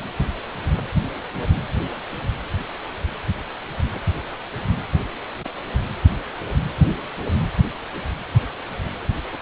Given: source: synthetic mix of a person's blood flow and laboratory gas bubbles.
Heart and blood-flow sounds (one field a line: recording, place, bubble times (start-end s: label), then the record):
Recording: Doppler ultrasound of blood flow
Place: precordium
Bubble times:
no bubbles
From the record:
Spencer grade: 0 (complete lack of bubble signals)